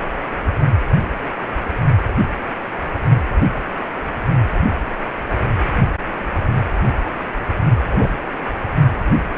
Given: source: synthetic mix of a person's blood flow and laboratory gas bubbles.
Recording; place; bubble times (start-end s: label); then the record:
Doppler ultrasound of blood flow; precordium
7.90-8.09 s: bubbles
From the record:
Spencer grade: 1 (occasional bubble signal discernible with the cardiac motion signal, with majority of cardiac periods free of bubbles); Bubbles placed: only in the low amplitude regions of the cardiac cycle